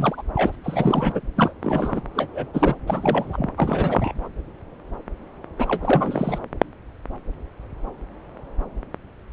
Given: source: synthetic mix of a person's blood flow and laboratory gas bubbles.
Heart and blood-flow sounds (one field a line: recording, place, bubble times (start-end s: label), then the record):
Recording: Doppler ultrasound of blood flow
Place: subclavian vein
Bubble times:
0.00-0.22 s: bubbles
0.35-0.55 s: bubbles
0.63-1.26 s: bubbles
1.36-1.53 s: bubbles
1.62-2.01 s: bubbles
2.15-2.27 s: bubbles
2.32-2.75 s: bubbles
2.87-3.52 s: bubbles
3.56-4.29 s: bubbles
5.59-6.38 s: bubbles
From the record:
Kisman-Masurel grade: 332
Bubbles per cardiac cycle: rolling drumbeat, 9 or more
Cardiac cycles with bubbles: 50 to 99%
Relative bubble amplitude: moderate (0.250 to 0.450)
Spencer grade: 3 (all of the cardiac periods contain showers or single bubble signals, but not dominating or overriding the cardiac motion signals)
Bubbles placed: anywhere in the cardiac cycle